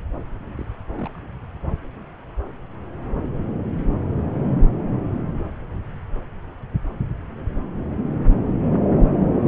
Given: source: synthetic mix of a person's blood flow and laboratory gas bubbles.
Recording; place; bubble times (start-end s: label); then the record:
Doppler ultrasound of blood flow; subclavian vein
0.57-0.65 s: bubbles
0.94-1.20 s: bubbles
From the record:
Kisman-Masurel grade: 111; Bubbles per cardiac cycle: 1 to 2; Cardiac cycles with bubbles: 1 to 10%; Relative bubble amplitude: barely perceptible (0.100 to 0.250); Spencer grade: 1 (occasional bubble signal discernible with the cardiac motion signal, with majority of cardiac periods free of bubbles); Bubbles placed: anywhere in the cardiac cycle